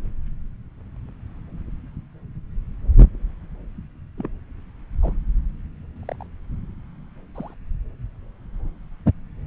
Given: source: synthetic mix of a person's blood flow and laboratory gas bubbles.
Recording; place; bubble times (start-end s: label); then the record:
Doppler ultrasound of blood flow; subclavian vein
4.18-4.29 s: bubbles
5.02-5.12 s: bubbles
5.96-6.04 s: bubbles
6.07-6.27 s: bubbles
7.35-7.54 s: bubbles
From the record:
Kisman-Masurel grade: 121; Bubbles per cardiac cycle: 1 to 2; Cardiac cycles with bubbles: 10 to 50%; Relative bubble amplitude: barely perceptible (0.100 to 0.250); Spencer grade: 2 (many but less than half of the cardiac periods contain bubble signals, singularly or in groups); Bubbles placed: anywhere in the cardiac cycle